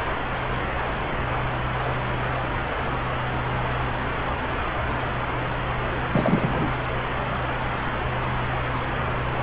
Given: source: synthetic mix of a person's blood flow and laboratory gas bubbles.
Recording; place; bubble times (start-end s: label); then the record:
Doppler ultrasound of blood flow; subclavian vein
6.12-6.71 s: bubbles
From the record:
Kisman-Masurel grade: 211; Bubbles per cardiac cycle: several, 3 to 8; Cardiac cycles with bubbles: 1 to 10%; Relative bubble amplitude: barely perceptible (0.100 to 0.250); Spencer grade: 1 (occasional bubble signal discernible with the cardiac motion signal, with majority of cardiac periods free of bubbles); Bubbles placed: anywhere in the cardiac cycle